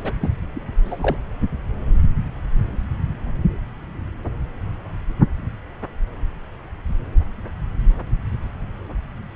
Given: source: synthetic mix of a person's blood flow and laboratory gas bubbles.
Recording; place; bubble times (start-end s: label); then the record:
Doppler ultrasound of blood flow; subclavian vein
0.04-0.13 s: bubbles
0.21-0.29 s: bubbles
0.55-0.59 s: bubbles
0.85-0.96 s: bubbles
0.99-1.17 s: bubbles
From the record:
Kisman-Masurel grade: 212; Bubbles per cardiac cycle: several, 3 to 8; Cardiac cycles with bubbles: 1 to 10%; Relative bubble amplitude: moderate (0.250 to 0.450); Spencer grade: 1 (occasional bubble signal discernible with the cardiac motion signal, with majority of cardiac periods free of bubbles); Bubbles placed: anywhere in the cardiac cycle